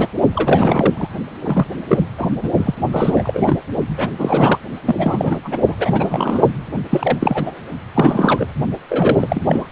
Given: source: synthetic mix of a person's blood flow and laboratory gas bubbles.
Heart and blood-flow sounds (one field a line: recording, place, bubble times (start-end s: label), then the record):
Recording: Doppler ultrasound of blood flow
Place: precordium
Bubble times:
0.00-0.07 s: bubbles
0.34-1.08 s: bubbles
1.43-1.66 s: bubbles
1.88-2.06 s: bubbles
2.18-2.33 s: bubbles
2.42-2.51 s: bubbles
2.57-2.75 s: bubbles
2.92-3.60 s: bubbles
3.96-4.59 s: bubbles
4.86-5.37 s: bubbles
5.44-5.58 s: bubbles
5.67-5.75 s: bubbles
5.79-6.49 s: bubbles
6.89-7.63 s: bubbles
7.94-8.46 s: bubbles
8.90-9.45 s: bubbles
9.47-9.67 s: bubbles
9.69-9.72 s: bubbles
From the record:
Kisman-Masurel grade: 343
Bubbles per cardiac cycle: rolling drumbeat, 9 or more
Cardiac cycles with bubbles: 100%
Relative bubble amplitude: loud (0.450 to 0.775)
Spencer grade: 3 (all of the cardiac periods contain showers or single bubble signals, but not dominating or overriding the cardiac motion signals)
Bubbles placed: only in the low amplitude regions of the cardiac cycle